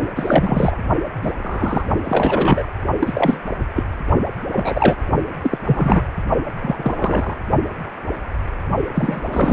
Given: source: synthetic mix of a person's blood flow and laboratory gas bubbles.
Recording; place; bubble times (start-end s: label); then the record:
Doppler ultrasound of blood flow; precordium
0.16-0.76 s: bubbles
1.23-1.32 s: bubbles
1.39-1.87 s: bubbles
2.04-2.66 s: bubbles
3.00-3.38 s: bubbles
3.75-3.83 s: bubbles
4.51-4.96 s: bubbles
5.42-5.58 s: bubbles
5.67-6.03 s: bubbles
6.58-7.34 s: bubbles
8.95-9.21 s: bubbles
9.24-9.53 s: bubbles
From the record:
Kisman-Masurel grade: 233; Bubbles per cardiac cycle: several, 3 to 8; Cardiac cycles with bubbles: 50 to 99%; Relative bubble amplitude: loud (0.450 to 0.775); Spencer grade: 3 (all of the cardiac periods contain showers or single bubble signals, but not dominating or overriding the cardiac motion signals); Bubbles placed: only in the low amplitude regions of the cardiac cycle